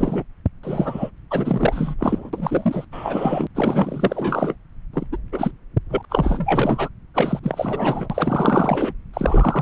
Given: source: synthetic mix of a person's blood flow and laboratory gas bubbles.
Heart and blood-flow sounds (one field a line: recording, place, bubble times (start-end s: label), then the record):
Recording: Doppler ultrasound of blood flow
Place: subclavian vein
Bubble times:
0.00-0.24 s: bubbles
0.63-1.11 s: bubbles
1.30-1.96 s: bubbles
1.98-2.85 s: bubbles
2.92-3.47 s: bubbles
3.54-4.55 s: bubbles
4.93-5.07 s: bubbles
5.12-5.17 s: bubbles
5.32-5.51 s: bubbles
5.89-6.05 s: bubbles
6.09-6.89 s: bubbles
7.14-7.40 s: bubbles
7.42-8.92 s: bubbles
9.13-9.62 s: bubbles
From the record:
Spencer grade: 4 (maximum detectable bubble signal sounding continuously throughout systole and diastole of every cardiac period, and overriding the amplitude of the normal cardiac signals)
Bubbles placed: anywhere in the cardiac cycle